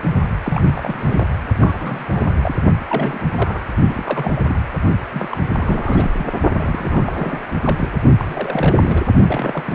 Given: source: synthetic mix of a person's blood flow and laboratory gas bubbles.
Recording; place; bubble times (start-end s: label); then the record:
Doppler ultrasound of blood flow; precordium
0.42-1.27 s: bubbles
1.60-2.60 s: bubbles
2.89-3.20 s: bubbles
3.35-3.63 s: bubbles
3.86-4.31 s: bubbles
4.36-4.42 s: bubbles
4.48-4.58 s: bubbles
5.12-5.37 s: bubbles
5.50-6.10 s: bubbles
6.17-6.28 s: bubbles
6.56-7.39 s: bubbles
7.61-7.90 s: bubbles
8.18-9.01 s: bubbles
9.27-9.75 s: bubbles
From the record:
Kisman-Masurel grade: 342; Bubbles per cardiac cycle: rolling drumbeat, 9 or more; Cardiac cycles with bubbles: 100%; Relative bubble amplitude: moderate (0.250 to 0.450); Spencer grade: 3 (all of the cardiac periods contain showers or single bubble signals, but not dominating or overriding the cardiac motion signals); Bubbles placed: only in the low amplitude regions of the cardiac cycle